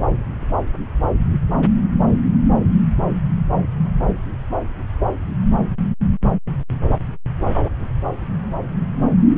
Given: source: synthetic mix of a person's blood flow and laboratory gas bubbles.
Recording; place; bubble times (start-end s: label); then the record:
Doppler ultrasound of blood flow; subclavian vein
no bubbles
From the record:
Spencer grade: 0 (complete lack of bubble signals)